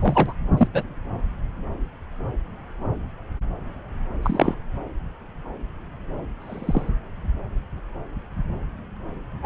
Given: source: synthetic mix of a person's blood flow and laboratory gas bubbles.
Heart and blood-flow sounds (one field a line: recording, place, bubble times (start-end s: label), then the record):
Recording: Doppler ultrasound of blood flow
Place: subclavian vein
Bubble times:
0.00-0.33 s: bubbles
0.57-0.67 s: bubbles
0.73-0.83 s: bubbles
4.22-4.55 s: bubbles
6.40-6.90 s: bubbles
9.42-9.46 s: bubbles
From the record:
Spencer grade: 2 (many but less than half of the cardiac periods contain bubble signals, singularly or in groups)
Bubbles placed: anywhere in the cardiac cycle